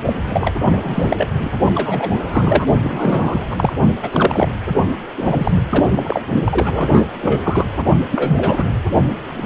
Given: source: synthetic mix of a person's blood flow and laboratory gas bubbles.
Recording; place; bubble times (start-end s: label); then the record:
Doppler ultrasound of blood flow; precordium
0.00-0.02 s: bubbles
0.05-0.13 s: bubbles
0.27-0.53 s: bubbles
0.60-1.28 s: bubbles
1.40-1.49 s: bubbles
1.75-2.11 s: bubbles
2.15-2.66 s: bubbles
2.83-3.46 s: bubbles
3.50-3.73 s: bubbles
4.02-4.53 s: bubbles
5.17-5.52 s: bubbles
5.70-6.21 s: bubbles
6.44-7.06 s: bubbles
7.22-7.65 s: bubbles
8.10-8.69 s: bubbles
From the record:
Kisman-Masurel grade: 332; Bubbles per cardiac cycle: rolling drumbeat, 9 or more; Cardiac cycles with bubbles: 50 to 99%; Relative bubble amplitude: moderate (0.250 to 0.450); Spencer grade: 3 (all of the cardiac periods contain showers or single bubble signals, but not dominating or overriding the cardiac motion signals); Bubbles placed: only in the low amplitude regions of the cardiac cycle